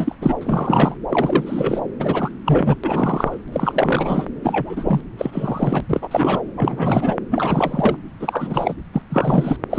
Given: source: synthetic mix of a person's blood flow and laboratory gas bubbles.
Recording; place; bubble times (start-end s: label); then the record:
Doppler ultrasound of blood flow; subclavian vein
0.00-0.15 s: bubbles
0.21-0.34 s: bubbles
0.41-0.94 s: bubbles
1.09-1.80 s: bubbles
1.99-2.31 s: bubbles
2.45-2.76 s: bubbles
2.83-3.38 s: bubbles
3.52-4.25 s: bubbles
4.42-5.00 s: bubbles
5.18-5.80 s: bubbles
5.88-6.08 s: bubbles
6.11-6.40 s: bubbles
6.56-7.14 s: bubbles
7.30-7.96 s: bubbles
8.20-8.74 s: bubbles
8.94-9.03 s: bubbles
9.09-9.56 s: bubbles
9.70-9.79 s: bubbles
From the record:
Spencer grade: 3 (all of the cardiac periods contain showers or single bubble signals, but not dominating or overriding the cardiac motion signals); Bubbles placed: anywhere in the cardiac cycle